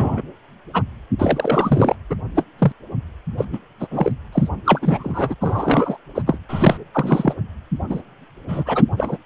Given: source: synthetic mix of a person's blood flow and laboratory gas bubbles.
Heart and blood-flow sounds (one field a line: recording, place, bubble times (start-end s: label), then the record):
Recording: Doppler ultrasound of blood flow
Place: precordium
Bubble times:
0.00-0.22 s: bubbles
0.73-0.83 s: bubbles
1.19-1.96 s: bubbles
2.10-2.15 s: bubbles
2.35-2.46 s: bubbles
2.58-2.72 s: bubbles
3.37-3.45 s: bubbles
3.52-3.58 s: bubbles
3.79-3.87 s: bubbles
3.90-4.12 s: bubbles
4.32-4.49 s: bubbles
4.66-4.79 s: bubbles
4.82-5.35 s: bubbles
5.41-5.97 s: bubbles
6.15-6.22 s: bubbles
6.26-6.39 s: bubbles
6.49-6.78 s: bubbles
6.94-7.34 s: bubbles
7.89-8.02 s: bubbles
8.48-8.84 s: bubbles
8.97-9.17 s: bubbles
From the record:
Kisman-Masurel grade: 243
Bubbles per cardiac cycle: several, 3 to 8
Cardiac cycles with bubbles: 100%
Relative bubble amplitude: loud (0.450 to 0.775)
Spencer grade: 3 (all of the cardiac periods contain showers or single bubble signals, but not dominating or overriding the cardiac motion signals)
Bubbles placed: anywhere in the cardiac cycle